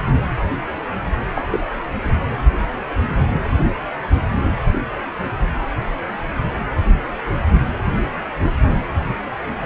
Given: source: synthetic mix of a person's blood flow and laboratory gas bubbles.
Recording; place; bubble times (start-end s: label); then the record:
Doppler ultrasound of blood flow; precordium
1.35-1.42 s: bubbles
1.50-1.59 s: bubbles
From the record:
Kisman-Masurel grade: 112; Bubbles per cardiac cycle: 1 to 2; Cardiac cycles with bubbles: 1 to 10%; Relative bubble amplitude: moderate (0.250 to 0.450); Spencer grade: 1 (occasional bubble signal discernible with the cardiac motion signal, with majority of cardiac periods free of bubbles); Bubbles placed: anywhere in the cardiac cycle